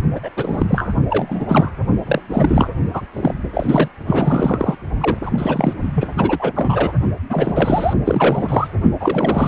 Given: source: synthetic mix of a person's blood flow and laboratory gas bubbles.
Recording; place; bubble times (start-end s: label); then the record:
Doppler ultrasound of blood flow; precordium
0.14-0.20 s: bubbles
0.23-0.30 s: bubbles
0.36-0.93 s: bubbles
1.10-1.71 s: bubbles
2.05-2.21 s: bubbles
2.29-2.69 s: bubbles
2.92-3.02 s: bubbles
3.13-3.34 s: bubbles
3.53-3.88 s: bubbles
4.06-4.75 s: bubbles
5.00-5.17 s: bubbles
5.22-5.74 s: bubbles
5.94-6.10 s: bubbles
6.17-6.52 s: bubbles
6.55-6.93 s: bubbles
7.29-7.93 s: bubbles
8.04-8.68 s: bubbles
8.99-9.48 s: bubbles
From the record:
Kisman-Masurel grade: 343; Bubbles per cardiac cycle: rolling drumbeat, 9 or more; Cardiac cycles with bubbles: 100%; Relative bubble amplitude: loud (0.450 to 0.775); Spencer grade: 3 (all of the cardiac periods contain showers or single bubble signals, but not dominating or overriding the cardiac motion signals); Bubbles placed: only in the low amplitude regions of the cardiac cycle